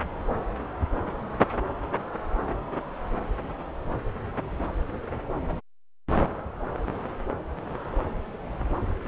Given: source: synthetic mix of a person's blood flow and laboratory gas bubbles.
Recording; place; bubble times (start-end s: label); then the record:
Doppler ultrasound of blood flow; subclavian vein
no bubbles
From the record:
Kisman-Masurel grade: 000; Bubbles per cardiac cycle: 0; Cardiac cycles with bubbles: 0%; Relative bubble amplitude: no bubbles discernible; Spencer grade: 0 (complete lack of bubble signals)